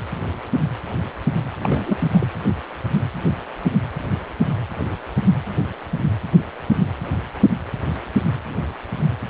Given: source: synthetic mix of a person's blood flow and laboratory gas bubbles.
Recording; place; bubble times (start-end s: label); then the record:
Doppler ultrasound of blood flow; precordium
1.59-2.08 s: bubbles
2.12-2.28 s: bubbles
From the record:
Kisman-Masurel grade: 212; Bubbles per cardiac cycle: several, 3 to 8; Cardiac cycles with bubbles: 1 to 10%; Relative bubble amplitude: moderate (0.250 to 0.450); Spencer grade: 1 (occasional bubble signal discernible with the cardiac motion signal, with majority of cardiac periods free of bubbles); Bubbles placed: anywhere in the cardiac cycle